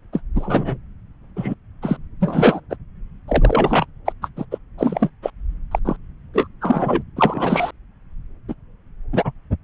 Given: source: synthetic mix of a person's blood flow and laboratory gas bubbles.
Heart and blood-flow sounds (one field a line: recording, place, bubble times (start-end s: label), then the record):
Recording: Doppler ultrasound of blood flow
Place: subclavian vein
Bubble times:
0.12-0.20 s: bubbles
0.36-0.77 s: bubbles
1.36-1.54 s: bubbles
1.82-1.98 s: bubbles
2.19-2.60 s: bubbles
2.69-2.75 s: bubbles
3.27-3.85 s: bubbles
4.05-4.12 s: bubbles
4.22-4.29 s: bubbles
4.37-4.46 s: bubbles
4.51-4.58 s: bubbles
4.78-5.09 s: bubbles
5.22-5.30 s: bubbles
5.71-5.79 s: bubbles
5.84-5.96 s: bubbles
6.33-6.47 s: bubbles
6.61-7.03 s: bubbles
7.17-7.71 s: bubbles
8.48-8.55 s: bubbles
9.12-9.32 s: bubbles
From the record:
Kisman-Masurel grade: 243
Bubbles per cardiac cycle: several, 3 to 8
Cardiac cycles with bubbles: 100%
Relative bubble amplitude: loud (0.450 to 0.775)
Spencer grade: 3 (all of the cardiac periods contain showers or single bubble signals, but not dominating or overriding the cardiac motion signals)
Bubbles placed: anywhere in the cardiac cycle